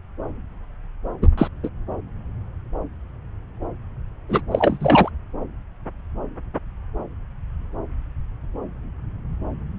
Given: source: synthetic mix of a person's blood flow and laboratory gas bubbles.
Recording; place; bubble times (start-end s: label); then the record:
Doppler ultrasound of blood flow; subclavian vein
1.22-1.28 s: bubbles
1.38-1.48 s: bubbles
1.63-1.69 s: bubbles
4.29-4.41 s: bubbles
4.51-5.09 s: bubbles
From the record:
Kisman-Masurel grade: 223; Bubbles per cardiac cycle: several, 3 to 8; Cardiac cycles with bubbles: 10 to 50%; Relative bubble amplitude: loud (0.450 to 0.775); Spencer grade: 2 (many but less than half of the cardiac periods contain bubble signals, singularly or in groups); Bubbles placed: anywhere in the cardiac cycle